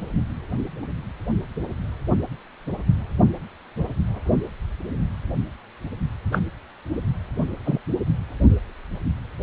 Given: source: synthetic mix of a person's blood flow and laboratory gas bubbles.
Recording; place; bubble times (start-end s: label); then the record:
Doppler ultrasound of blood flow; precordium
6.32-6.41 s: bubbles
7.66-7.79 s: bubbles
From the record:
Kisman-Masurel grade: 122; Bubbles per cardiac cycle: 1 to 2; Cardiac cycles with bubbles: 10 to 50%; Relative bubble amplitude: moderate (0.250 to 0.450); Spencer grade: 2 (many but less than half of the cardiac periods contain bubble signals, singularly or in groups); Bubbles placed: anywhere in the cardiac cycle